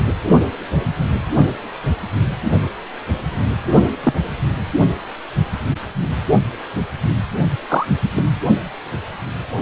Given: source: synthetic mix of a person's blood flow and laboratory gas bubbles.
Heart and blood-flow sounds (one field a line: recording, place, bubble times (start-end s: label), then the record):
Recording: Doppler ultrasound of blood flow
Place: precordium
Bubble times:
0.00-0.04 s: bubbles
4.03-4.13 s: bubbles
7.68-7.87 s: bubbles
8.16-8.22 s: bubbles
From the record:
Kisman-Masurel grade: 122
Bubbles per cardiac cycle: 1 to 2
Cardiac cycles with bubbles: 10 to 50%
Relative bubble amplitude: moderate (0.250 to 0.450)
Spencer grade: 2 (many but less than half of the cardiac periods contain bubble signals, singularly or in groups)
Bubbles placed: only in the low amplitude regions of the cardiac cycle